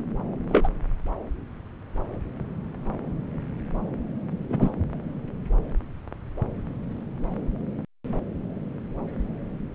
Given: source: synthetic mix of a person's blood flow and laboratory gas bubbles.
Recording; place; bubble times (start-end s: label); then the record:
Doppler ultrasound of blood flow; subclavian vein
0.48-0.68 s: bubbles
4.49-4.70 s: bubbles
From the record:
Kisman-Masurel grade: 122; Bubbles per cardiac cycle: 1 to 2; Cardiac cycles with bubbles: 10 to 50%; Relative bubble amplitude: moderate (0.250 to 0.450); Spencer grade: 2 (many but less than half of the cardiac periods contain bubble signals, singularly or in groups); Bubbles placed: anywhere in the cardiac cycle